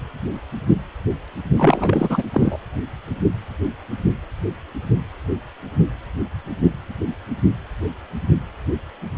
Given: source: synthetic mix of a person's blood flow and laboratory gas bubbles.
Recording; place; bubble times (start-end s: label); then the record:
Doppler ultrasound of blood flow; precordium
1.56-2.23 s: bubbles
2.33-2.56 s: bubbles
From the record:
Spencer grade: 1 (occasional bubble signal discernible with the cardiac motion signal, with majority of cardiac periods free of bubbles); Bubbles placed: anywhere in the cardiac cycle